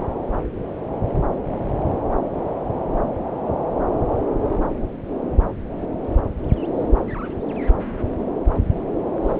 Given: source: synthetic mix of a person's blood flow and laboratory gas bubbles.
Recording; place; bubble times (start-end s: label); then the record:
Doppler ultrasound of blood flow; subclavian vein
9.22-9.40 s: bubbles
From the record:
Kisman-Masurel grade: 211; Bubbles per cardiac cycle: several, 3 to 8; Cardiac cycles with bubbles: 1 to 10%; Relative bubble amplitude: barely perceptible (0.100 to 0.250); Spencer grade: 1 (occasional bubble signal discernible with the cardiac motion signal, with majority of cardiac periods free of bubbles); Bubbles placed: anywhere in the cardiac cycle